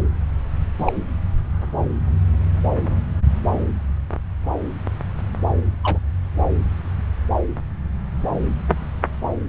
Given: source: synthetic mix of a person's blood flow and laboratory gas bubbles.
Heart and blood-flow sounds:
Doppler ultrasound of blood flow; subclavian vein
0.78-0.92 s: bubbles
5.83-5.99 s: bubbles
From the record:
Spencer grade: 1 (occasional bubble signal discernible with the cardiac motion signal, with majority of cardiac periods free of bubbles); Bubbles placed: anywhere in the cardiac cycle

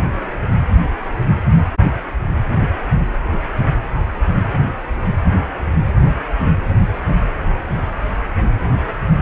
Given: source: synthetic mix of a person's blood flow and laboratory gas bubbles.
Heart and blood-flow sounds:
Doppler ultrasound of blood flow; precordium
no bubbles
From the record:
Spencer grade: 0 (complete lack of bubble signals)

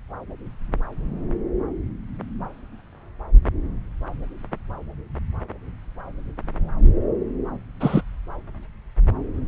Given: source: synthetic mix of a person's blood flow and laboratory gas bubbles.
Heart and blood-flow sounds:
Doppler ultrasound of blood flow; subclavian vein
7.80-8.02 s: bubbles
From the record:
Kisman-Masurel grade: 113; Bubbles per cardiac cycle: 1 to 2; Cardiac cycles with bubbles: 1 to 10%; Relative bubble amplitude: loud (0.450 to 0.775); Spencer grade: 1 (occasional bubble signal discernible with the cardiac motion signal, with majority of cardiac periods free of bubbles); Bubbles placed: anywhere in the cardiac cycle

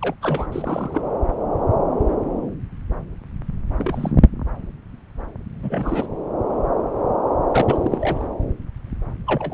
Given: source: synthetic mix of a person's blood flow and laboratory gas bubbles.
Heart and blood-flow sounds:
Doppler ultrasound of blood flow; subclavian vein
0.01-0.14 s: bubbles
0.22-0.47 s: bubbles
0.52-1.02 s: bubbles
3.77-4.12 s: bubbles
4.21-4.30 s: bubbles
5.62-6.07 s: bubbles
7.50-7.79 s: bubbles
7.82-8.23 s: bubbles
9.26-9.54 s: bubbles
From the record:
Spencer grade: 3 (all of the cardiac periods contain showers or single bubble signals, but not dominating or overriding the cardiac motion signals); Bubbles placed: anywhere in the cardiac cycle

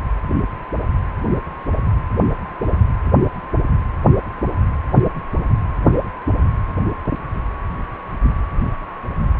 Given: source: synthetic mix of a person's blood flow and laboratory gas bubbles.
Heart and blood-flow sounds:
Doppler ultrasound of blood flow; precordium
no bubbles
From the record:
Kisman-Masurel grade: 000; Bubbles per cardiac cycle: 0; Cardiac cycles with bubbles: 0%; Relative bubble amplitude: no bubbles discernible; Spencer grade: 0 (complete lack of bubble signals)

